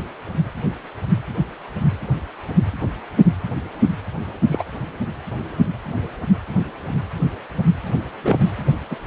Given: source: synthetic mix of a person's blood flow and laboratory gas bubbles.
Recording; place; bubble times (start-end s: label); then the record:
Doppler ultrasound of blood flow; precordium
4.51-4.64 s: bubbles
8.15-8.39 s: bubbles
8.91-8.96 s: bubbles
From the record:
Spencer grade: 2 (many but less than half of the cardiac periods contain bubble signals, singularly or in groups); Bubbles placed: anywhere in the cardiac cycle